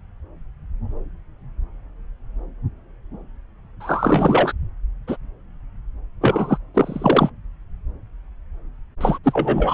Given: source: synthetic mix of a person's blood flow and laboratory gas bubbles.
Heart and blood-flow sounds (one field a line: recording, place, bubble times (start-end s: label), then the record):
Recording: Doppler ultrasound of blood flow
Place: subclavian vein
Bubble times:
3.80-4.52 s: bubbles
5.08-5.17 s: bubbles
6.21-6.58 s: bubbles
6.74-7.30 s: bubbles
9.01-9.19 s: bubbles
9.24-9.74 s: bubbles
From the record:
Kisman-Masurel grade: 333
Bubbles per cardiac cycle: rolling drumbeat, 9 or more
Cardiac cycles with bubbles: 50 to 99%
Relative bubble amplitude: loud (0.450 to 0.775)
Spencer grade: 3 (all of the cardiac periods contain showers or single bubble signals, but not dominating or overriding the cardiac motion signals)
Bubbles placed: anywhere in the cardiac cycle